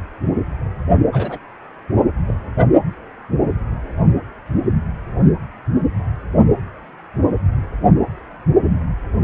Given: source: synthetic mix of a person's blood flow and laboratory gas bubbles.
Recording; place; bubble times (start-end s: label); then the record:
Doppler ultrasound of blood flow; precordium
1.12-1.38 s: bubbles
2.27-2.35 s: bubbles
From the record:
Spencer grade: 1 (occasional bubble signal discernible with the cardiac motion signal, with majority of cardiac periods free of bubbles); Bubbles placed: only in the low amplitude regions of the cardiac cycle